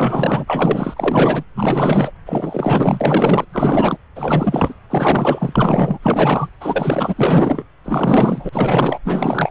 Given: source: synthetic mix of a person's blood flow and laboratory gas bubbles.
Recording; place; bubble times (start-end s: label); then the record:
Doppler ultrasound of blood flow; subclavian vein
0.00-1.44 s: bubbles
1.54-2.11 s: bubbles
2.25-3.45 s: bubbles
3.50-3.98 s: bubbles
4.16-4.74 s: bubbles
4.90-5.99 s: bubbles
6.02-6.50 s: bubbles
6.61-7.64 s: bubbles
7.85-8.50 s: bubbles
8.52-8.99 s: bubbles
9.04-9.51 s: bubbles
From the record:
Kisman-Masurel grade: 444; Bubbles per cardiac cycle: continuous sound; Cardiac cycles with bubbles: 100%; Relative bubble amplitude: maximal (0.775 to 0.999); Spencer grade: 4 (maximum detectable bubble signal sounding continuously throughout systole and diastole of every cardiac period, and overriding the amplitude of the normal cardiac signals); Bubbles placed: anywhere in the cardiac cycle